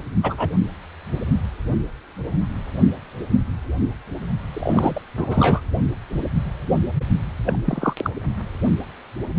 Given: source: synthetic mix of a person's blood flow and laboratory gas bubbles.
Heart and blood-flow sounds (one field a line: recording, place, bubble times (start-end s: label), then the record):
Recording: Doppler ultrasound of blood flow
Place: precordium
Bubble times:
0.23-0.50 s: bubbles
4.54-5.00 s: bubbles
5.17-5.61 s: bubbles
7.46-7.59 s: bubbles
7.65-7.93 s: bubbles
7.98-8.10 s: bubbles
From the record:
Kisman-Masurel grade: 223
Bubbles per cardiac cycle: several, 3 to 8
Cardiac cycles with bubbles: 10 to 50%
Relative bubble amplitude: loud (0.450 to 0.775)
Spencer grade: 2 (many but less than half of the cardiac periods contain bubble signals, singularly or in groups)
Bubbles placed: only in the low amplitude regions of the cardiac cycle